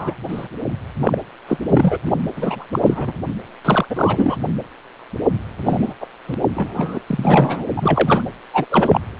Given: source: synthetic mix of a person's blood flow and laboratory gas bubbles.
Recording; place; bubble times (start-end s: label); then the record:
Doppler ultrasound of blood flow; precordium
0.00-0.15 s: bubbles
0.28-0.47 s: bubbles
1.01-1.17 s: bubbles
1.48-1.57 s: bubbles
1.68-1.97 s: bubbles
2.05-2.12 s: bubbles
2.36-2.65 s: bubbles
2.72-2.79 s: bubbles
2.86-3.13 s: bubbles
3.65-3.86 s: bubbles
3.90-4.37 s: bubbles
5.62-5.94 s: bubbles
6.00-6.07 s: bubbles
6.28-6.35 s: bubbles
6.54-7.00 s: bubbles
7.07-7.66 s: bubbles
7.76-8.22 s: bubbles
8.54-8.65 s: bubbles
8.70-9.00 s: bubbles
From the record:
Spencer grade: 3 (all of the cardiac periods contain showers or single bubble signals, but not dominating or overriding the cardiac motion signals); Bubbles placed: anywhere in the cardiac cycle